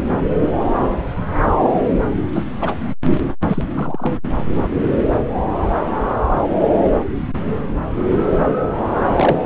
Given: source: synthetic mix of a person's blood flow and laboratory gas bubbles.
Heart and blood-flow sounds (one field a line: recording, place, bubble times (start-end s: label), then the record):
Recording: Doppler ultrasound of blood flow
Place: subclavian vein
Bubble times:
0.41-0.48 s: bubbles
1.63-1.69 s: bubbles
2.33-2.43 s: bubbles
2.61-2.75 s: bubbles
3.48-3.63 s: bubbles
3.75-4.13 s: bubbles
9.17-9.38 s: bubbles
From the record:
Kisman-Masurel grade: 122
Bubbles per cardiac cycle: 1 to 2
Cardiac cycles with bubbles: 10 to 50%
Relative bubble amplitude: moderate (0.250 to 0.450)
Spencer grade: 2 (many but less than half of the cardiac periods contain bubble signals, singularly or in groups)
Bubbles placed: anywhere in the cardiac cycle